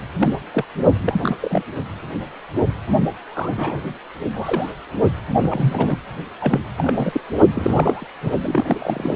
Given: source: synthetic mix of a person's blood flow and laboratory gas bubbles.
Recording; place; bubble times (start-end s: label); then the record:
Doppler ultrasound of blood flow; precordium
0.20-0.34 s: bubbles
0.53-0.65 s: bubbles
1.05-1.38 s: bubbles
1.41-1.63 s: bubbles
3.28-3.81 s: bubbles
4.34-4.73 s: bubbles
5.36-5.97 s: bubbles
6.40-6.60 s: bubbles
6.78-7.21 s: bubbles
7.55-8.05 s: bubbles
8.23-8.31 s: bubbles
8.41-9.16 s: bubbles
From the record:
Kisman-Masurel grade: 232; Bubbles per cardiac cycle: several, 3 to 8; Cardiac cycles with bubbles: 50 to 99%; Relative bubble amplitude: moderate (0.250 to 0.450); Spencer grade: 3 (all of the cardiac periods contain showers or single bubble signals, but not dominating or overriding the cardiac motion signals); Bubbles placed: only in the low amplitude regions of the cardiac cycle